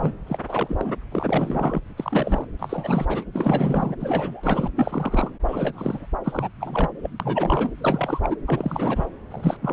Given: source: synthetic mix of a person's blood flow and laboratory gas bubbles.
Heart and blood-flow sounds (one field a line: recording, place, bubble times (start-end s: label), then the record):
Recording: Doppler ultrasound of blood flow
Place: subclavian vein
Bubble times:
0.00-0.12 s: bubbles
0.27-0.38 s: bubbles
0.48-0.93 s: bubbles
1.11-1.80 s: bubbles
1.97-2.47 s: bubbles
2.59-3.06 s: bubbles
3.09-3.24 s: bubbles
3.33-3.96 s: bubbles
4.00-4.68 s: bubbles
4.75-5.31 s: bubbles
5.47-6.07 s: bubbles
6.24-6.49 s: bubbles
6.61-6.90 s: bubbles
7.03-7.10 s: bubbles
7.20-7.71 s: bubbles
7.78-8.20 s: bubbles
8.22-8.36 s: bubbles
8.46-9.05 s: bubbles
9.30-9.57 s: bubbles
9.62-9.73 s: bubbles
From the record:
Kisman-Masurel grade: 342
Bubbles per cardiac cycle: rolling drumbeat, 9 or more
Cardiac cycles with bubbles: 100%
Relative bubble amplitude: moderate (0.250 to 0.450)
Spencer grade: 3 (all of the cardiac periods contain showers or single bubble signals, but not dominating or overriding the cardiac motion signals)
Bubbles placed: anywhere in the cardiac cycle